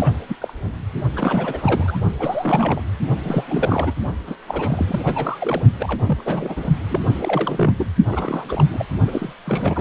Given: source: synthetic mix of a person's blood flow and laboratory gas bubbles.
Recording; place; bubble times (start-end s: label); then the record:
Doppler ultrasound of blood flow; precordium
0.00-0.14 s: bubbles
0.28-0.37 s: bubbles
0.41-0.53 s: bubbles
1.16-1.99 s: bubbles
2.19-2.82 s: bubbles
3.24-3.44 s: bubbles
3.48-3.94 s: bubbles
4.27-4.36 s: bubbles
4.47-5.62 s: bubbles
5.79-6.22 s: bubbles
6.25-6.68 s: bubbles
6.90-7.00 s: bubbles
7.07-7.16 s: bubbles
7.21-7.74 s: bubbles
7.78-7.87 s: bubbles
8.05-8.86 s: bubbles
9.07-9.33 s: bubbles
9.46-9.81 s: bubbles
From the record:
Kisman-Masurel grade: 342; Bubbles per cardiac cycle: rolling drumbeat, 9 or more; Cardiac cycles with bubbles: 100%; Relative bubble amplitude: moderate (0.250 to 0.450); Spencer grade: 3 (all of the cardiac periods contain showers or single bubble signals, but not dominating or overriding the cardiac motion signals); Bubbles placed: only in the low amplitude regions of the cardiac cycle